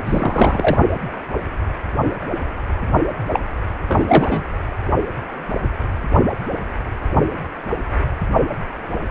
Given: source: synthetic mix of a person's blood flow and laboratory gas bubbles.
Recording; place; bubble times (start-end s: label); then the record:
Doppler ultrasound of blood flow; precordium
0.05-0.78 s: bubbles
3.32-3.40 s: bubbles
3.88-4.46 s: bubbles
From the record:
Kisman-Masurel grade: 223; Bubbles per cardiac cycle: several, 3 to 8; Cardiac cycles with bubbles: 10 to 50%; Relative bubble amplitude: loud (0.450 to 0.775); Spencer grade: 2 (many but less than half of the cardiac periods contain bubble signals, singularly or in groups); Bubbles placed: only in the low amplitude regions of the cardiac cycle